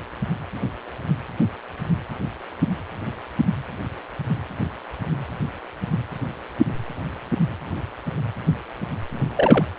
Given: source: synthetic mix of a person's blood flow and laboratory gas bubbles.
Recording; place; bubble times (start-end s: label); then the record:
Doppler ultrasound of blood flow; precordium
9.36-9.64 s: bubbles
From the record:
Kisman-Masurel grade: 112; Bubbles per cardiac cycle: 1 to 2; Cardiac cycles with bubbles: 1 to 10%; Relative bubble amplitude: moderate (0.250 to 0.450); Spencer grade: 1 (occasional bubble signal discernible with the cardiac motion signal, with majority of cardiac periods free of bubbles); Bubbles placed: anywhere in the cardiac cycle